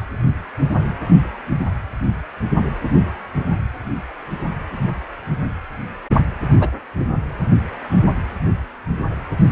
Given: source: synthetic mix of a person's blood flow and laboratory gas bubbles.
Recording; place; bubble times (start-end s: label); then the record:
Doppler ultrasound of blood flow; precordium
6.60-6.70 s: bubbles
6.99-7.04 s: bubbles
From the record:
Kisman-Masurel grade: 112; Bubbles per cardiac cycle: 1 to 2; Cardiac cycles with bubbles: 1 to 10%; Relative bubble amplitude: moderate (0.250 to 0.450); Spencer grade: 1 (occasional bubble signal discernible with the cardiac motion signal, with majority of cardiac periods free of bubbles); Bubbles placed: anywhere in the cardiac cycle